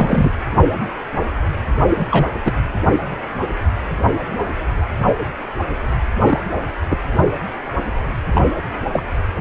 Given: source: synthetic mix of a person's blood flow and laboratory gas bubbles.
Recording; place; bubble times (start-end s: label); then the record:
Doppler ultrasound of blood flow; precordium
0.00-0.31 s: bubbles
1.88-2.04 s: bubbles
2.11-2.29 s: bubbles
2.45-2.53 s: bubbles
6.24-6.38 s: bubbles
6.90-6.98 s: bubbles
8.34-8.49 s: bubbles
8.93-9.04 s: bubbles
9.36-9.41 s: bubbles
From the record:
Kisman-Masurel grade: 223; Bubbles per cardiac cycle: several, 3 to 8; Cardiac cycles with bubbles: 10 to 50%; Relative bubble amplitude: loud (0.450 to 0.775); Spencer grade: 2 (many but less than half of the cardiac periods contain bubble signals, singularly or in groups); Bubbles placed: anywhere in the cardiac cycle